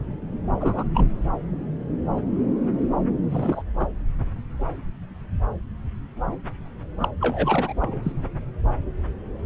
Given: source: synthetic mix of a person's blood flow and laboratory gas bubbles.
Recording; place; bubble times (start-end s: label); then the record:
Doppler ultrasound of blood flow; subclavian vein
0.60-0.84 s: bubbles
0.94-1.08 s: bubbles
3.30-3.62 s: bubbles
3.79-3.88 s: bubbles
7.00-7.08 s: bubbles
7.21-7.73 s: bubbles
7.80-8.12 s: bubbles
From the record:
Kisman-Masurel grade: 222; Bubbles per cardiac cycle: several, 3 to 8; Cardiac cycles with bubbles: 10 to 50%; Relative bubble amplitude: moderate (0.250 to 0.450); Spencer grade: 2 (many but less than half of the cardiac periods contain bubble signals, singularly or in groups); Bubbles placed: anywhere in the cardiac cycle